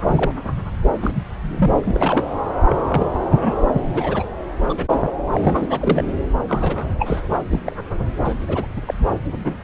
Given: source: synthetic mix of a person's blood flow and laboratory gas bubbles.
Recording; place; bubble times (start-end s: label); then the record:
Doppler ultrasound of blood flow; subclavian vein
0.07-0.31 s: bubbles
1.02-1.11 s: bubbles
1.15-1.23 s: bubbles
1.48-1.98 s: bubbles
2.00-2.25 s: bubbles
2.69-2.75 s: bubbles
2.88-3.06 s: bubbles
3.15-3.19 s: bubbles
3.31-3.54 s: bubbles
3.73-3.82 s: bubbles
3.94-4.23 s: bubbles
4.69-4.75 s: bubbles
4.77-4.86 s: bubbles
4.92-5.00 s: bubbles
5.05-5.12 s: bubbles
5.32-5.67 s: bubbles
5.69-6.03 s: bubbles
6.49-6.89 s: bubbles
6.99-7.21 s: bubbles
7.30-7.43 s: bubbles
7.51-7.60 s: bubbles
7.64-7.76 s: bubbles
8.24-8.35 s: bubbles
8.48-8.67 s: bubbles
8.76-8.81 s: bubbles
8.87-8.95 s: bubbles
9.44-9.56 s: bubbles
From the record:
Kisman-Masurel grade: 242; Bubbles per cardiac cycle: several, 3 to 8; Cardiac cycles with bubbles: 100%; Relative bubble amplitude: moderate (0.250 to 0.450); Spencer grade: 3 (all of the cardiac periods contain showers or single bubble signals, but not dominating or overriding the cardiac motion signals); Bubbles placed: anywhere in the cardiac cycle